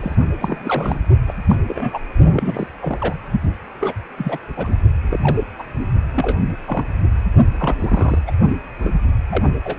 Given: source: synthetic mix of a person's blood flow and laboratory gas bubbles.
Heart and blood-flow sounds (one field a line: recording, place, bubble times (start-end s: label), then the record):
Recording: Doppler ultrasound of blood flow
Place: precordium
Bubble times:
0.00-0.15 s: bubbles
0.40-1.01 s: bubbles
1.27-1.33 s: bubbles
1.48-1.55 s: bubbles
1.68-1.99 s: bubbles
2.36-2.68 s: bubbles
2.80-3.18 s: bubbles
3.81-3.94 s: bubbles
4.17-4.38 s: bubbles
4.57-4.76 s: bubbles
5.02-5.43 s: bubbles
5.58-5.63 s: bubbles
6.13-6.39 s: bubbles
6.66-6.87 s: bubbles
7.59-8.22 s: bubbles
8.27-8.32 s: bubbles
8.79-8.92 s: bubbles
9.30-9.49 s: bubbles
9.64-9.77 s: bubbles
From the record:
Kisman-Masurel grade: 242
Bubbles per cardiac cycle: several, 3 to 8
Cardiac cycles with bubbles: 100%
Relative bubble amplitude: moderate (0.250 to 0.450)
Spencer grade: 3 (all of the cardiac periods contain showers or single bubble signals, but not dominating or overriding the cardiac motion signals)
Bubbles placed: only in the low amplitude regions of the cardiac cycle